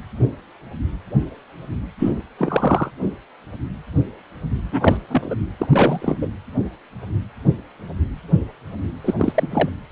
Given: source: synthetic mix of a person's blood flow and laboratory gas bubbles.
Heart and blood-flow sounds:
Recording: Doppler ultrasound of blood flow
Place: precordium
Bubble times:
1.98-2.12 s: bubbles
2.38-2.91 s: bubbles
4.71-4.97 s: bubbles
5.08-5.35 s: bubbles
5.59-6.17 s: bubbles
6.21-6.28 s: bubbles
9.04-9.14 s: bubbles
9.18-9.48 s: bubbles
9.51-9.69 s: bubbles
From the record:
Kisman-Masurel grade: 222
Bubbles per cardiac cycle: several, 3 to 8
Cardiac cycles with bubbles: 10 to 50%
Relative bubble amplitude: moderate (0.250 to 0.450)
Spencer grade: 2 (many but less than half of the cardiac periods contain bubble signals, singularly or in groups)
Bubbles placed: anywhere in the cardiac cycle

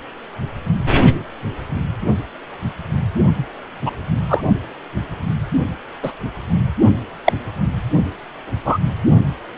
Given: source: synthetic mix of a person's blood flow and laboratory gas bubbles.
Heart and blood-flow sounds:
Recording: Doppler ultrasound of blood flow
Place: precordium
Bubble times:
3.85-3.91 s: bubbles
4.29-4.41 s: bubbles
6.03-6.12 s: bubbles
7.25-7.33 s: bubbles
8.65-8.78 s: bubbles
From the record:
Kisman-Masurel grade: 123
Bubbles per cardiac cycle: 1 to 2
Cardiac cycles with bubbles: 10 to 50%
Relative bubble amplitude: loud (0.450 to 0.775)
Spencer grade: 2 (many but less than half of the cardiac periods contain bubble signals, singularly or in groups)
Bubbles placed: only in the low amplitude regions of the cardiac cycle

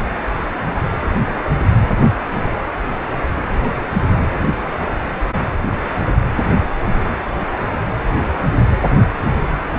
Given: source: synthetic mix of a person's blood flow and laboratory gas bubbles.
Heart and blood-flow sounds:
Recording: Doppler ultrasound of blood flow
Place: precordium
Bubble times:
9.70-9.79 s: bubbles
From the record:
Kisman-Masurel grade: 121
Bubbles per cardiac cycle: 1 to 2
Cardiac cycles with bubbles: 10 to 50%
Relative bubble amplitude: barely perceptible (0.100 to 0.250)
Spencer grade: 2 (many but less than half of the cardiac periods contain bubble signals, singularly or in groups)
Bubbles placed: anywhere in the cardiac cycle

